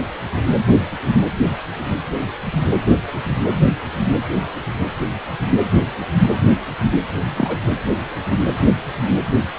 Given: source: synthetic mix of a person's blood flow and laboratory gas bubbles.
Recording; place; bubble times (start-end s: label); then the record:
Doppler ultrasound of blood flow; precordium
7.23-7.64 s: bubbles
From the record:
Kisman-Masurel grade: 112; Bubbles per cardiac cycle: 1 to 2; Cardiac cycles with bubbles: 1 to 10%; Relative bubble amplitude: moderate (0.250 to 0.450); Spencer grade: 1 (occasional bubble signal discernible with the cardiac motion signal, with majority of cardiac periods free of bubbles); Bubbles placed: anywhere in the cardiac cycle